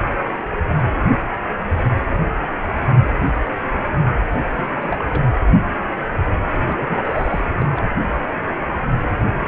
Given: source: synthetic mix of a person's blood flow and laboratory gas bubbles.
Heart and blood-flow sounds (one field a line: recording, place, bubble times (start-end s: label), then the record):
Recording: Doppler ultrasound of blood flow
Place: precordium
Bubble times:
4.57-4.63 s: bubbles
4.73-5.04 s: bubbles
5.10-5.26 s: bubbles
5.30-5.37 s: bubbles
5.47-5.52 s: bubbles
6.67-7.42 s: bubbles
7.58-7.66 s: bubbles
7.75-7.83 s: bubbles
From the record:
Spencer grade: 2 (many but less than half of the cardiac periods contain bubble signals, singularly or in groups)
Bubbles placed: anywhere in the cardiac cycle